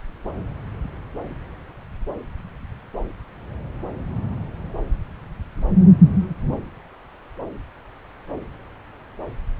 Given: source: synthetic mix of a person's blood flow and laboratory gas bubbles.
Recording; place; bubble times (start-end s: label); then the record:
Doppler ultrasound of blood flow; subclavian vein
no bubbles
From the record:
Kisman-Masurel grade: 000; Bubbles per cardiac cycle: 0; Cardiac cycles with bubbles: 0%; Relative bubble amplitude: no bubbles discernible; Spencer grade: 0 (complete lack of bubble signals)